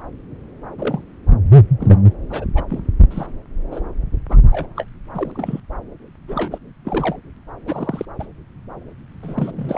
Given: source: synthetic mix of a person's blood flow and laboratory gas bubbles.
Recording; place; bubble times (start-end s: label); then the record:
Doppler ultrasound of blood flow; subclavian vein
0.78-1.02 s: bubbles
1.80-1.99 s: bubbles
2.29-2.46 s: bubbles
2.56-2.63 s: bubbles
2.68-2.79 s: bubbles
3.10-3.27 s: bubbles
3.71-3.79 s: bubbles
4.29-4.38 s: bubbles
4.51-4.67 s: bubbles
4.76-4.86 s: bubbles
5.14-5.60 s: bubbles
6.28-6.58 s: bubbles
6.85-7.16 s: bubbles
7.67-8.05 s: bubbles
8.19-8.26 s: bubbles
9.22-9.78 s: bubbles
From the record:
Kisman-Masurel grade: 242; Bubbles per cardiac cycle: several, 3 to 8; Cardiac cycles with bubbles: 100%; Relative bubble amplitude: moderate (0.250 to 0.450); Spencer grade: 3 (all of the cardiac periods contain showers or single bubble signals, but not dominating or overriding the cardiac motion signals); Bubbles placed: anywhere in the cardiac cycle